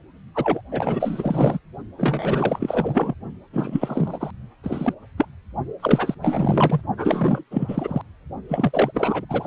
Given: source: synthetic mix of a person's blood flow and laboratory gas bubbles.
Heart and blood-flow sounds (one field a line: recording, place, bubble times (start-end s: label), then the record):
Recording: Doppler ultrasound of blood flow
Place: precordium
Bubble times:
0.35-0.61 s: bubbles
0.71-1.59 s: bubbles
1.97-3.14 s: bubbles
3.53-4.32 s: bubbles
4.63-4.95 s: bubbles
5.17-5.27 s: bubbles
5.79-6.15 s: bubbles
6.21-6.81 s: bubbles
6.97-7.44 s: bubbles
7.50-8.01 s: bubbles
8.48-9.25 s: bubbles
9.29-9.47 s: bubbles
From the record:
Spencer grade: 4 (maximum detectable bubble signal sounding continuously throughout systole and diastole of every cardiac period, and overriding the amplitude of the normal cardiac signals)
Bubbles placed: only in the low amplitude regions of the cardiac cycle